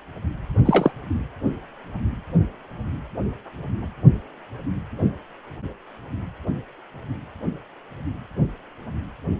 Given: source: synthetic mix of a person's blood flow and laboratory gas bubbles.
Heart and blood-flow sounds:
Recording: Doppler ultrasound of blood flow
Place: precordium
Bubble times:
0.65-0.91 s: bubbles
From the record:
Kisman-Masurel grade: 113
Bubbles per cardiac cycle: 1 to 2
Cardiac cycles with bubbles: 1 to 10%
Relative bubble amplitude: loud (0.450 to 0.775)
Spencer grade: 1 (occasional bubble signal discernible with the cardiac motion signal, with majority of cardiac periods free of bubbles)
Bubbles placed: anywhere in the cardiac cycle

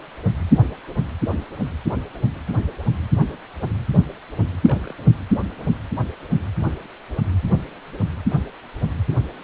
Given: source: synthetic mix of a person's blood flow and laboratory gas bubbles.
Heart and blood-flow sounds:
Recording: Doppler ultrasound of blood flow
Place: precordium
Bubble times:
4.62-4.94 s: bubbles
From the record:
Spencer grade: 1 (occasional bubble signal discernible with the cardiac motion signal, with majority of cardiac periods free of bubbles)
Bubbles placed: anywhere in the cardiac cycle

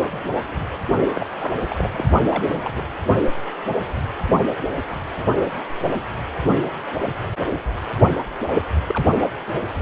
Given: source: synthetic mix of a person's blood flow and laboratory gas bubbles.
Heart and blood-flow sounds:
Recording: Doppler ultrasound of blood flow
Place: precordium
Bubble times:
1.15-1.25 s: bubbles
1.39-1.53 s: bubbles
1.69-1.90 s: bubbles
1.92-2.04 s: bubbles
2.23-2.83 s: bubbles
8.13-8.17 s: bubbles
8.87-9.13 s: bubbles
9.16-9.23 s: bubbles
From the record:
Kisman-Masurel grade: 221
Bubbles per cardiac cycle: several, 3 to 8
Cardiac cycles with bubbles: 10 to 50%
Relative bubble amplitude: barely perceptible (0.100 to 0.250)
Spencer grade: 2 (many but less than half of the cardiac periods contain bubble signals, singularly or in groups)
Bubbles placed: only in the low amplitude regions of the cardiac cycle

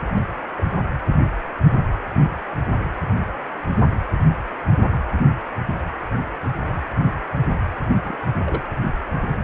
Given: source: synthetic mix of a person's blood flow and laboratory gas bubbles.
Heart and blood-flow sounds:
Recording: Doppler ultrasound of blood flow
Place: precordium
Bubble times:
0.15-0.20 s: bubbles
0.57-0.64 s: bubbles
3.76-3.88 s: bubbles
8.04-8.17 s: bubbles
8.46-8.63 s: bubbles
From the record:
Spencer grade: 2 (many but less than half of the cardiac periods contain bubble signals, singularly or in groups)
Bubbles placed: anywhere in the cardiac cycle

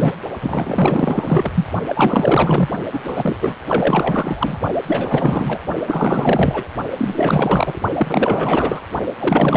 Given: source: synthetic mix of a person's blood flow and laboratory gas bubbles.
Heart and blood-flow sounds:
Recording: Doppler ultrasound of blood flow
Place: precordium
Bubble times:
0.00-0.15 s: bubbles
0.40-1.65 s: bubbles
1.88-2.69 s: bubbles
2.92-3.00 s: bubbles
3.04-3.36 s: bubbles
3.41-3.56 s: bubbles
3.67-4.59 s: bubbles
4.87-5.59 s: bubbles
5.87-6.64 s: bubbles
6.97-7.81 s: bubbles
7.97-8.81 s: bubbles
9.19-9.57 s: bubbles
From the record:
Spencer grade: 4 (maximum detectable bubble signal sounding continuously throughout systole and diastole of every cardiac period, and overriding the amplitude of the normal cardiac signals)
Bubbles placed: only in the low amplitude regions of the cardiac cycle

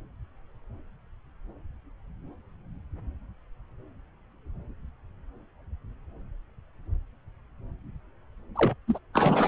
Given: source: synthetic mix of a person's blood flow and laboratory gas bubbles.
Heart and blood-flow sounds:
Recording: Doppler ultrasound of blood flow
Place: subclavian vein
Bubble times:
8.55-8.74 s: bubbles
8.88-8.98 s: bubbles
9.14-9.48 s: bubbles
From the record:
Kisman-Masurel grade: 211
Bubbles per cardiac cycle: several, 3 to 8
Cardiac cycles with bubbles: 1 to 10%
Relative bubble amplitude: barely perceptible (0.100 to 0.250)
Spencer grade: 1 (occasional bubble signal discernible with the cardiac motion signal, with majority of cardiac periods free of bubbles)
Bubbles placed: anywhere in the cardiac cycle

